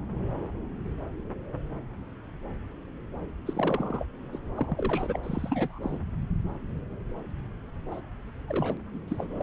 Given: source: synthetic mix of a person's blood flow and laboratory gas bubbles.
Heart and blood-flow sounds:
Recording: Doppler ultrasound of blood flow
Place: subclavian vein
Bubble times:
3.46-4.04 s: bubbles
4.32-4.38 s: bubbles
4.57-5.19 s: bubbles
5.23-5.79 s: bubbles
5.82-5.98 s: bubbles
7.91-8.01 s: bubbles
8.48-8.78 s: bubbles
8.94-8.99 s: bubbles
9.08-9.43 s: bubbles
From the record:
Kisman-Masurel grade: 221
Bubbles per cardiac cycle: several, 3 to 8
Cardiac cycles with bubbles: 10 to 50%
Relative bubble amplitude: barely perceptible (0.100 to 0.250)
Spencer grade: 2 (many but less than half of the cardiac periods contain bubble signals, singularly or in groups)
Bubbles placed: anywhere in the cardiac cycle

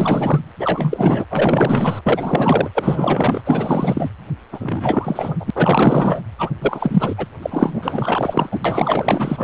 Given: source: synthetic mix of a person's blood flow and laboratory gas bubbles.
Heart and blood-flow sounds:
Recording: Doppler ultrasound of blood flow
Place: precordium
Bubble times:
0.00-0.41 s: bubbles
0.59-1.25 s: bubbles
1.31-2.02 s: bubbles
2.06-2.70 s: bubbles
2.75-3.42 s: bubbles
3.45-4.10 s: bubbles
4.52-5.50 s: bubbles
5.55-6.21 s: bubbles
6.38-6.50 s: bubbles
6.60-7.15 s: bubbles
7.17-7.26 s: bubbles
7.42-8.59 s: bubbles
8.64-9.44 s: bubbles
From the record:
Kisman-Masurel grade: 444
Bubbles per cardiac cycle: continuous sound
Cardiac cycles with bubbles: 100%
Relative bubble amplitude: maximal (0.775 to 0.999)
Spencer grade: 4 (maximum detectable bubble signal sounding continuously throughout systole and diastole of every cardiac period, and overriding the amplitude of the normal cardiac signals)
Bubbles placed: anywhere in the cardiac cycle

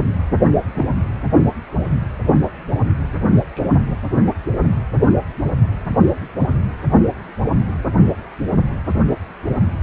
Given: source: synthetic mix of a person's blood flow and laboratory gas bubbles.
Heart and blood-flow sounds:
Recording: Doppler ultrasound of blood flow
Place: precordium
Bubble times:
0.74-0.86 s: bubbles
3.32-3.41 s: bubbles
3.55-3.70 s: bubbles
From the record:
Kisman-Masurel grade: 122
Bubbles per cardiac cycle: 1 to 2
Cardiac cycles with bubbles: 10 to 50%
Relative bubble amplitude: moderate (0.250 to 0.450)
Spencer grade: 2 (many but less than half of the cardiac periods contain bubble signals, singularly or in groups)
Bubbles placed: anywhere in the cardiac cycle

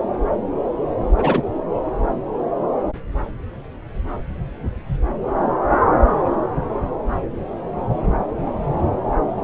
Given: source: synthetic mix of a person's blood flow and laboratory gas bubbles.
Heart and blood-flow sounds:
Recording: Doppler ultrasound of blood flow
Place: subclavian vein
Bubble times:
1.17-1.42 s: bubbles
From the record:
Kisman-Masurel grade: 113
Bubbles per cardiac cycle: 1 to 2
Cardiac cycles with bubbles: 1 to 10%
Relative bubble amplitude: loud (0.450 to 0.775)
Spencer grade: 1 (occasional bubble signal discernible with the cardiac motion signal, with majority of cardiac periods free of bubbles)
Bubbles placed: anywhere in the cardiac cycle

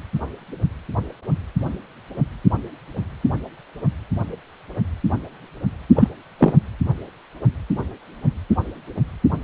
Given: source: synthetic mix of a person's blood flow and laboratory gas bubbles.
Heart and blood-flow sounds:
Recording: Doppler ultrasound of blood flow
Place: precordium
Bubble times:
5.96-6.08 s: bubbles
6.38-6.53 s: bubbles
From the record:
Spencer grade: 1 (occasional bubble signal discernible with the cardiac motion signal, with majority of cardiac periods free of bubbles)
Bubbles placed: anywhere in the cardiac cycle

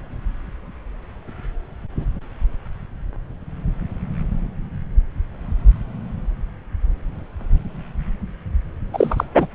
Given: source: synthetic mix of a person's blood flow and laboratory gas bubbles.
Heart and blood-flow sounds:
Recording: Doppler ultrasound of blood flow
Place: subclavian vein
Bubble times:
8.93-9.24 s: bubbles
9.34-9.47 s: bubbles
From the record:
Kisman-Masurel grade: 213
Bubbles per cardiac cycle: several, 3 to 8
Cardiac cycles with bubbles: 1 to 10%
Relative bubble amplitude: loud (0.450 to 0.775)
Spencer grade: 1 (occasional bubble signal discernible with the cardiac motion signal, with majority of cardiac periods free of bubbles)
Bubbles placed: anywhere in the cardiac cycle

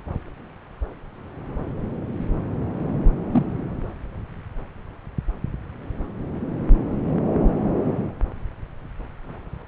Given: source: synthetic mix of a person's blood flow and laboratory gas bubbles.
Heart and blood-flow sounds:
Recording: Doppler ultrasound of blood flow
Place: subclavian vein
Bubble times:
3.31-3.46 s: bubbles
From the record:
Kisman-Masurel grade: 112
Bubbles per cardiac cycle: 1 to 2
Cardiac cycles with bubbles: 1 to 10%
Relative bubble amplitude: moderate (0.250 to 0.450)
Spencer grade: 1 (occasional bubble signal discernible with the cardiac motion signal, with majority of cardiac periods free of bubbles)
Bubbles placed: anywhere in the cardiac cycle

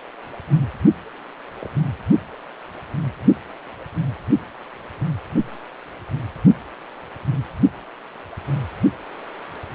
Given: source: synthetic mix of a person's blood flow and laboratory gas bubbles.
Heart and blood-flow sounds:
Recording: Doppler ultrasound of blood flow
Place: precordium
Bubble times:
1.60-1.69 s: bubbles
From the record:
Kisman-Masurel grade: 111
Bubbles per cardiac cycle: 1 to 2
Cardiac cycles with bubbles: 1 to 10%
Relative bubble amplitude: barely perceptible (0.100 to 0.250)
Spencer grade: 1 (occasional bubble signal discernible with the cardiac motion signal, with majority of cardiac periods free of bubbles)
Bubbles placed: only in the low amplitude regions of the cardiac cycle

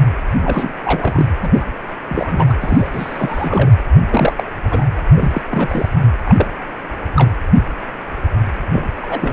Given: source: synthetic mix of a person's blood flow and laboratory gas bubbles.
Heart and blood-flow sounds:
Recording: Doppler ultrasound of blood flow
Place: precordium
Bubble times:
0.39-0.73 s: bubbles
0.83-1.27 s: bubbles
1.42-1.50 s: bubbles
1.54-1.64 s: bubbles
2.08-2.54 s: bubbles
2.60-2.90 s: bubbles
2.93-3.71 s: bubbles
4.09-4.44 s: bubbles
4.63-4.90 s: bubbles
5.16-5.42 s: bubbles
5.50-5.89 s: bubbles
6.25-6.47 s: bubbles
7.16-7.32 s: bubbles
8.71-8.93 s: bubbles
8.96-9.33 s: bubbles
From the record:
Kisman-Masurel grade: 232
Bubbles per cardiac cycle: several, 3 to 8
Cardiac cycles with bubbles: 50 to 99%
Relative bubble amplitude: moderate (0.250 to 0.450)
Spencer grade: 3 (all of the cardiac periods contain showers or single bubble signals, but not dominating or overriding the cardiac motion signals)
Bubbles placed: anywhere in the cardiac cycle

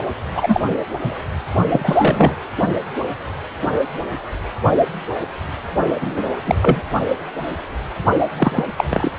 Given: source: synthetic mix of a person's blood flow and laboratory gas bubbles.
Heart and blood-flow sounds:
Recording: Doppler ultrasound of blood flow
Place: precordium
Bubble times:
0.35-0.62 s: bubbles
1.04-1.15 s: bubbles
1.71-2.35 s: bubbles
5.95-6.31 s: bubbles
6.46-6.55 s: bubbles
6.62-6.80 s: bubbles
8.38-8.63 s: bubbles
8.77-8.84 s: bubbles
8.89-9.12 s: bubbles
From the record:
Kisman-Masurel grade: 233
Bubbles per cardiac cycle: several, 3 to 8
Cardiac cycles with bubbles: 50 to 99%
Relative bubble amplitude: loud (0.450 to 0.775)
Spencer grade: 3 (all of the cardiac periods contain showers or single bubble signals, but not dominating or overriding the cardiac motion signals)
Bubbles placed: only in the low amplitude regions of the cardiac cycle

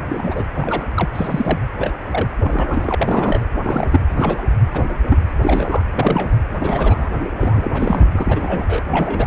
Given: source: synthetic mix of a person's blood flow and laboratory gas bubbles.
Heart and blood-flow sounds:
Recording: Doppler ultrasound of blood flow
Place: precordium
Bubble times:
0.08-0.43 s: bubbles
0.54-0.86 s: bubbles
0.94-1.09 s: bubbles
1.14-1.59 s: bubbles
1.79-1.94 s: bubbles
2.10-2.29 s: bubbles
2.40-2.95 s: bubbles
2.98-3.47 s: bubbles
3.62-4.00 s: bubbles
4.17-4.43 s: bubbles
4.73-4.92 s: bubbles
5.09-5.18 s: bubbles
5.42-5.82 s: bubbles
5.94-6.35 s: bubbles
6.59-7.10 s: bubbles
7.39-8.06 s: bubbles
8.12-8.82 s: bubbles
8.90-9.26 s: bubbles
From the record:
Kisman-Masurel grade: 242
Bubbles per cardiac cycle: several, 3 to 8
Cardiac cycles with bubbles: 100%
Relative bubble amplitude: moderate (0.250 to 0.450)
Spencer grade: 3 (all of the cardiac periods contain showers or single bubble signals, but not dominating or overriding the cardiac motion signals)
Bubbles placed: anywhere in the cardiac cycle

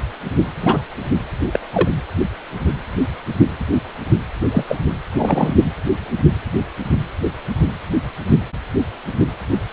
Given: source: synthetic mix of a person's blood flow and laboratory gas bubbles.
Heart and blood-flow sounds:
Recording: Doppler ultrasound of blood flow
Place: precordium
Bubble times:
0.60-0.80 s: bubbles
1.52-1.60 s: bubbles
1.73-1.88 s: bubbles
4.51-4.64 s: bubbles
4.68-4.77 s: bubbles
5.15-5.54 s: bubbles
5.64-5.72 s: bubbles
From the record:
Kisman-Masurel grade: 123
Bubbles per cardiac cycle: 1 to 2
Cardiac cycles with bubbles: 10 to 50%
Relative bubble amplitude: loud (0.450 to 0.775)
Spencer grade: 2 (many but less than half of the cardiac periods contain bubble signals, singularly or in groups)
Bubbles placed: anywhere in the cardiac cycle

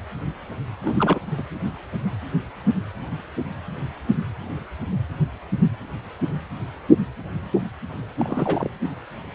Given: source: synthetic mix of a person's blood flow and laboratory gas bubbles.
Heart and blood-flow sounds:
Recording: Doppler ultrasound of blood flow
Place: precordium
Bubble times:
0.83-1.19 s: bubbles
1.38-1.43 s: bubbles
8.19-8.69 s: bubbles
From the record:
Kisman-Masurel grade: 221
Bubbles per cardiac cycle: several, 3 to 8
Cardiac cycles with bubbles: 10 to 50%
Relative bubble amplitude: barely perceptible (0.100 to 0.250)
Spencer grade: 2 (many but less than half of the cardiac periods contain bubble signals, singularly or in groups)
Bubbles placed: anywhere in the cardiac cycle

